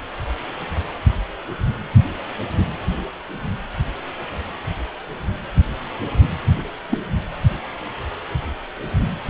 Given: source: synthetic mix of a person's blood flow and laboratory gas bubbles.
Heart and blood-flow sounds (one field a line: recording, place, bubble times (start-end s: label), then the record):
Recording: Doppler ultrasound of blood flow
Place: precordium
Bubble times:
6.89-6.98 s: bubbles
From the record:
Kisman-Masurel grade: 112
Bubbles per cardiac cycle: 1 to 2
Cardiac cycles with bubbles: 1 to 10%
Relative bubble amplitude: moderate (0.250 to 0.450)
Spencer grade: 1 (occasional bubble signal discernible with the cardiac motion signal, with majority of cardiac periods free of bubbles)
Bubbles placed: anywhere in the cardiac cycle